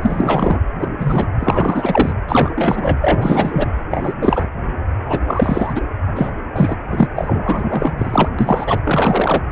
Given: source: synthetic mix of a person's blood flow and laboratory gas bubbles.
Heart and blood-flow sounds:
Doppler ultrasound of blood flow; precordium
0.02-0.60 s: bubbles
0.79-0.89 s: bubbles
0.99-1.27 s: bubbles
1.39-2.13 s: bubbles
2.27-2.51 s: bubbles
2.55-2.98 s: bubbles
3.01-3.73 s: bubbles
3.90-4.14 s: bubbles
4.21-4.47 s: bubbles
5.03-5.20 s: bubbles
5.27-5.82 s: bubbles
6.06-6.33 s: bubbles
6.54-6.77 s: bubbles
6.91-7.08 s: bubbles
7.16-7.93 s: bubbles
7.98-8.29 s: bubbles
8.38-8.80 s: bubbles
8.84-9.43 s: bubbles
From the record:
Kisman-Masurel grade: 343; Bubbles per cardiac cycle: rolling drumbeat, 9 or more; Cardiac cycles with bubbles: 100%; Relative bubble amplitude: loud (0.450 to 0.775); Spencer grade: 3 (all of the cardiac periods contain showers or single bubble signals, but not dominating or overriding the cardiac motion signals); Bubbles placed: anywhere in the cardiac cycle

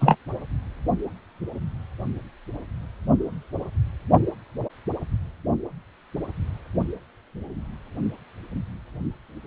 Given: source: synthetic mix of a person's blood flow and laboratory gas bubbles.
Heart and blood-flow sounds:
Doppler ultrasound of blood flow; precordium
0.00-0.16 s: bubbles
From the record:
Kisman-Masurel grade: 113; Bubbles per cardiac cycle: 1 to 2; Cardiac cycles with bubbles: 1 to 10%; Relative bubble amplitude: loud (0.450 to 0.775); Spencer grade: 1 (occasional bubble signal discernible with the cardiac motion signal, with majority of cardiac periods free of bubbles); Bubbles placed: only in the low amplitude regions of the cardiac cycle

